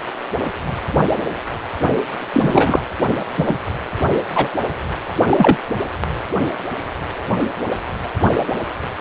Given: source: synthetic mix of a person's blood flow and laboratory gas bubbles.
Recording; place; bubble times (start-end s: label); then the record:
Doppler ultrasound of blood flow; precordium
2.33-2.79 s: bubbles
3.37-3.56 s: bubbles
4.34-4.47 s: bubbles
5.30-5.57 s: bubbles
From the record:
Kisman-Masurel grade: 223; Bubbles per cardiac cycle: several, 3 to 8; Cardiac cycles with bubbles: 10 to 50%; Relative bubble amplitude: loud (0.450 to 0.775); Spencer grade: 2 (many but less than half of the cardiac periods contain bubble signals, singularly or in groups); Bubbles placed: anywhere in the cardiac cycle